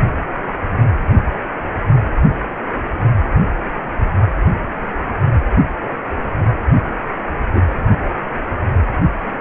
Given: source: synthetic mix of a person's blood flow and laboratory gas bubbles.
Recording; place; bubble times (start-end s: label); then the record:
Doppler ultrasound of blood flow; precordium
7.54-7.70 s: bubbles
From the record:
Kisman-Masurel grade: 123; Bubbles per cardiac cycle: 1 to 2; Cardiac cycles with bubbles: 10 to 50%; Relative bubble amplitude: loud (0.450 to 0.775); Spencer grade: 2 (many but less than half of the cardiac periods contain bubble signals, singularly or in groups); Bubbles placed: only in the low amplitude regions of the cardiac cycle